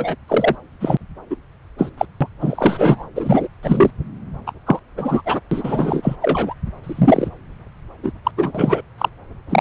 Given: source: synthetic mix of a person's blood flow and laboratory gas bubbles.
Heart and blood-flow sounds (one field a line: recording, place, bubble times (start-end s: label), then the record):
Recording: Doppler ultrasound of blood flow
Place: subclavian vein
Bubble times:
0.00-0.15 s: bubbles
0.28-0.56 s: bubbles
0.80-0.97 s: bubbles
1.30-1.36 s: bubbles
1.77-1.90 s: bubbles
1.98-2.06 s: bubbles
2.21-2.28 s: bubbles
2.41-3.05 s: bubbles
3.15-3.48 s: bubbles
3.62-3.91 s: bubbles
4.46-4.52 s: bubbles
4.66-4.79 s: bubbles
4.97-5.21 s: bubbles
5.25-5.40 s: bubbles
5.51-6.16 s: bubbles
6.21-6.54 s: bubbles
6.83-7.29 s: bubbles
8.02-8.12 s: bubbles
8.24-8.31 s: bubbles
8.38-8.81 s: bubbles
8.98-9.09 s: bubbles
9.49-9.61 s: bubbles
From the record:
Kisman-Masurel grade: 243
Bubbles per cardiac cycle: several, 3 to 8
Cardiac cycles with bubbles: 100%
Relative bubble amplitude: loud (0.450 to 0.775)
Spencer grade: 3 (all of the cardiac periods contain showers or single bubble signals, but not dominating or overriding the cardiac motion signals)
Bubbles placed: anywhere in the cardiac cycle